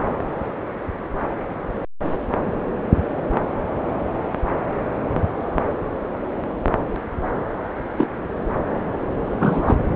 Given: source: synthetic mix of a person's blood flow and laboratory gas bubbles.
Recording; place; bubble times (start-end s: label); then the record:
Doppler ultrasound of blood flow; subclavian vein
7.98-8.08 s: bubbles
9.39-9.77 s: bubbles
From the record:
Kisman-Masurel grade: 113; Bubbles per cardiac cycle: 1 to 2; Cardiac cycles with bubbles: 1 to 10%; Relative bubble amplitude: loud (0.450 to 0.775); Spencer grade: 1 (occasional bubble signal discernible with the cardiac motion signal, with majority of cardiac periods free of bubbles); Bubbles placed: anywhere in the cardiac cycle